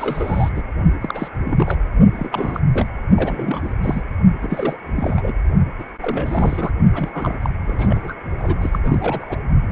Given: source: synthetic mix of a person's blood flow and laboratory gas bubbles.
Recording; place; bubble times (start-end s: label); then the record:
Doppler ultrasound of blood flow; precordium
0.00-0.50 s: bubbles
0.54-0.62 s: bubbles
1.01-1.29 s: bubbles
1.45-1.81 s: bubbles
2.15-2.60 s: bubbles
2.69-2.86 s: bubbles
3.16-3.73 s: bubbles
3.82-4.04 s: bubbles
4.42-4.77 s: bubbles
4.96-5.33 s: bubbles
5.79-5.83 s: bubbles
6.00-6.73 s: bubbles
6.94-7.40 s: bubbles
7.42-7.50 s: bubbles
7.66-8.13 s: bubbles
8.39-8.80 s: bubbles
8.84-9.41 s: bubbles
From the record:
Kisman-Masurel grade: 342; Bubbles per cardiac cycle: rolling drumbeat, 9 or more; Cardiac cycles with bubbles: 100%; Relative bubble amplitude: moderate (0.250 to 0.450); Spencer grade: 3 (all of the cardiac periods contain showers or single bubble signals, but not dominating or overriding the cardiac motion signals); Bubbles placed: only in the low amplitude regions of the cardiac cycle